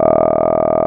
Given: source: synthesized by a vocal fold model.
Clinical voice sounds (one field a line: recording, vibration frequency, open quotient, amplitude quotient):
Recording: sustained vowel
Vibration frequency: 40 Hz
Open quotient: 0.1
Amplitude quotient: 1.4